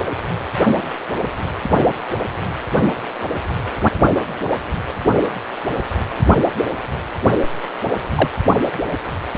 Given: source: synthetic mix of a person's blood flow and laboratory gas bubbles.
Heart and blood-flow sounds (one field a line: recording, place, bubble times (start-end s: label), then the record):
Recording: Doppler ultrasound of blood flow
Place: precordium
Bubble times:
8.15-8.29 s: bubbles
From the record:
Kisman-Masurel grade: 113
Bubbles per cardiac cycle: 1 to 2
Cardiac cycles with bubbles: 1 to 10%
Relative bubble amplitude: loud (0.450 to 0.775)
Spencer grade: 1 (occasional bubble signal discernible with the cardiac motion signal, with majority of cardiac periods free of bubbles)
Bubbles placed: only in the low amplitude regions of the cardiac cycle